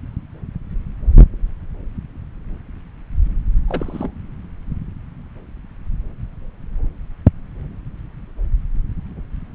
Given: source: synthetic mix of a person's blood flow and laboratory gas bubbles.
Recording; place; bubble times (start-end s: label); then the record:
Doppler ultrasound of blood flow; subclavian vein
3.68-4.12 s: bubbles
From the record:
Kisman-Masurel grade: 211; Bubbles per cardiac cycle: several, 3 to 8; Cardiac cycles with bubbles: 1 to 10%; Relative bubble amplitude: barely perceptible (0.100 to 0.250); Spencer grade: 1 (occasional bubble signal discernible with the cardiac motion signal, with majority of cardiac periods free of bubbles); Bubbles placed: anywhere in the cardiac cycle